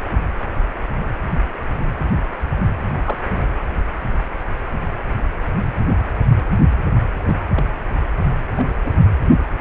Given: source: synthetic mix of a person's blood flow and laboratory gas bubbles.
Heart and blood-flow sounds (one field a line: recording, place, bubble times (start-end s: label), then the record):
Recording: Doppler ultrasound of blood flow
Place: precordium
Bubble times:
3.04-3.17 s: bubbles
7.25-7.36 s: bubbles
7.54-7.64 s: bubbles
8.57-8.66 s: bubbles
8.84-8.92 s: bubbles
From the record:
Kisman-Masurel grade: 122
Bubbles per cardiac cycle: 1 to 2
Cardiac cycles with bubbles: 10 to 50%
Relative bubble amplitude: moderate (0.250 to 0.450)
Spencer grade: 2 (many but less than half of the cardiac periods contain bubble signals, singularly or in groups)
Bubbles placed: only in the low amplitude regions of the cardiac cycle